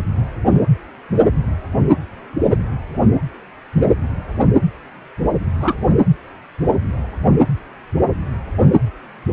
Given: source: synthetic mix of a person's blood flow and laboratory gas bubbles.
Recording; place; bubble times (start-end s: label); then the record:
Doppler ultrasound of blood flow; precordium
5.60-5.75 s: bubbles
From the record:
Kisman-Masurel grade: 112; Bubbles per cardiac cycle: 1 to 2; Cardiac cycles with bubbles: 1 to 10%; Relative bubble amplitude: moderate (0.250 to 0.450); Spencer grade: 1 (occasional bubble signal discernible with the cardiac motion signal, with majority of cardiac periods free of bubbles); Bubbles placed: anywhere in the cardiac cycle